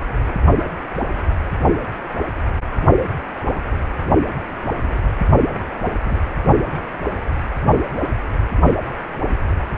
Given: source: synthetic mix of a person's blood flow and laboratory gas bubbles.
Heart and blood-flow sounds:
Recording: Doppler ultrasound of blood flow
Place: precordium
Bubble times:
6.04-6.18 s: bubbles
From the record:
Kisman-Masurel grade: 112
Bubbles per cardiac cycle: 1 to 2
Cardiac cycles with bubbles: 1 to 10%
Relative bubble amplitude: moderate (0.250 to 0.450)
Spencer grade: 1 (occasional bubble signal discernible with the cardiac motion signal, with majority of cardiac periods free of bubbles)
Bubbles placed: anywhere in the cardiac cycle

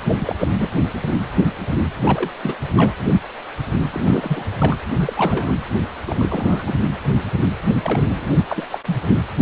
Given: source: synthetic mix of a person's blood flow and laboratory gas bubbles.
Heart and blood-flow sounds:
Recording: Doppler ultrasound of blood flow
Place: precordium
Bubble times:
0.18-0.35 s: bubbles
0.39-0.47 s: bubbles
0.59-0.70 s: bubbles
1.06-1.17 s: bubbles
2.05-2.30 s: bubbles
2.42-2.54 s: bubbles
2.76-2.94 s: bubbles
3.93-4.43 s: bubbles
4.59-4.76 s: bubbles
4.98-5.13 s: bubbles
5.17-5.52 s: bubbles
6.05-6.73 s: bubbles
7.83-8.03 s: bubbles
8.16-8.33 s: bubbles
8.49-8.67 s: bubbles
8.71-8.79 s: bubbles
8.87-8.97 s: bubbles
9.38-9.42 s: bubbles
From the record:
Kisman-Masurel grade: 232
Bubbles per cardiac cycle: several, 3 to 8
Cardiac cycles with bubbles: 50 to 99%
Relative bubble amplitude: moderate (0.250 to 0.450)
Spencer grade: 3 (all of the cardiac periods contain showers or single bubble signals, but not dominating or overriding the cardiac motion signals)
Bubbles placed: anywhere in the cardiac cycle

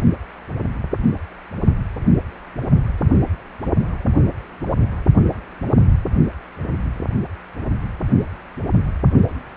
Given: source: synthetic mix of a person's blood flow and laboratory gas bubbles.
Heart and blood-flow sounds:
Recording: Doppler ultrasound of blood flow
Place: precordium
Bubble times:
1.97-2.21 s: bubbles
From the record:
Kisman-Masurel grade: 111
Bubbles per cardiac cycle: 1 to 2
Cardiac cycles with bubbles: 1 to 10%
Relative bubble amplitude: barely perceptible (0.100 to 0.250)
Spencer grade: 1 (occasional bubble signal discernible with the cardiac motion signal, with majority of cardiac periods free of bubbles)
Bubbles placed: only in the low amplitude regions of the cardiac cycle

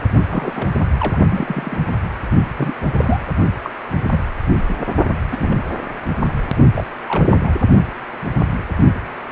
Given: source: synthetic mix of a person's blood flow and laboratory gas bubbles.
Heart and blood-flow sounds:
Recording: Doppler ultrasound of blood flow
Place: precordium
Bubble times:
0.29-0.69 s: bubbles
1.00-1.18 s: bubbles
1.28-1.79 s: bubbles
2.57-2.73 s: bubbles
2.94-3.25 s: bubbles
3.62-3.71 s: bubbles
4.09-4.20 s: bubbles
4.69-4.76 s: bubbles
5.32-5.58 s: bubbles
6.28-6.32 s: bubbles
6.75-6.84 s: bubbles
7.07-7.50 s: bubbles
From the record:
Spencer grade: 3 (all of the cardiac periods contain showers or single bubble signals, but not dominating or overriding the cardiac motion signals)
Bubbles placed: only in the low amplitude regions of the cardiac cycle

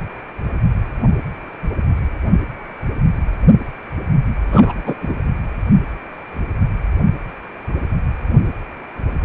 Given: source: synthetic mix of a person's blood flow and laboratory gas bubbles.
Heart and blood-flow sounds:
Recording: Doppler ultrasound of blood flow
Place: precordium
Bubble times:
4.47-4.94 s: bubbles
5.01-5.14 s: bubbles
From the record:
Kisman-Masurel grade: 213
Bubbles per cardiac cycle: several, 3 to 8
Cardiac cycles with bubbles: 1 to 10%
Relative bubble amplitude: loud (0.450 to 0.775)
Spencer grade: 1 (occasional bubble signal discernible with the cardiac motion signal, with majority of cardiac periods free of bubbles)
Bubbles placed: anywhere in the cardiac cycle

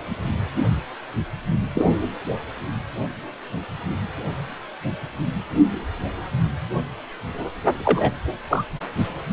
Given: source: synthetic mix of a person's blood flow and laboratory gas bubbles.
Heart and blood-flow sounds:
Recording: Doppler ultrasound of blood flow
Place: precordium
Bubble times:
1.75-1.91 s: bubbles
7.85-8.11 s: bubbles
8.49-8.64 s: bubbles
From the record:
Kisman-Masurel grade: 123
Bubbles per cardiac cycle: 1 to 2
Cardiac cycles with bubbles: 10 to 50%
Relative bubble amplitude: loud (0.450 to 0.775)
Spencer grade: 2 (many but less than half of the cardiac periods contain bubble signals, singularly or in groups)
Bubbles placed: anywhere in the cardiac cycle

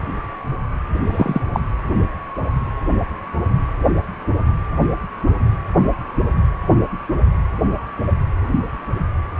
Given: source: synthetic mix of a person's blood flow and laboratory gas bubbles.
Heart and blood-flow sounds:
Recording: Doppler ultrasound of blood flow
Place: precordium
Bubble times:
1.07-1.42 s: bubbles
1.53-1.60 s: bubbles
From the record:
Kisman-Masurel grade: 113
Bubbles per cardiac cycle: 1 to 2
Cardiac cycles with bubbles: 1 to 10%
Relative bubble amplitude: loud (0.450 to 0.775)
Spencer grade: 1 (occasional bubble signal discernible with the cardiac motion signal, with majority of cardiac periods free of bubbles)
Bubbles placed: anywhere in the cardiac cycle

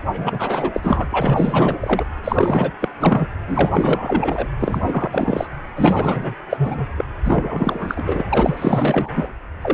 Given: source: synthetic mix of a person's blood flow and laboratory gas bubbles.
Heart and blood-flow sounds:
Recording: Doppler ultrasound of blood flow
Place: precordium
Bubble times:
0.12-0.71 s: bubbles
0.73-2.06 s: bubbles
2.24-2.73 s: bubbles
2.80-2.88 s: bubbles
3.00-3.27 s: bubbles
3.47-4.48 s: bubbles
4.58-5.47 s: bubbles
5.76-6.35 s: bubbles
6.50-6.87 s: bubbles
6.97-7.04 s: bubbles
7.25-8.24 s: bubbles
8.29-9.29 s: bubbles
9.62-9.73 s: bubbles
From the record:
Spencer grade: 4 (maximum detectable bubble signal sounding continuously throughout systole and diastole of every cardiac period, and overriding the amplitude of the normal cardiac signals)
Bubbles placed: anywhere in the cardiac cycle

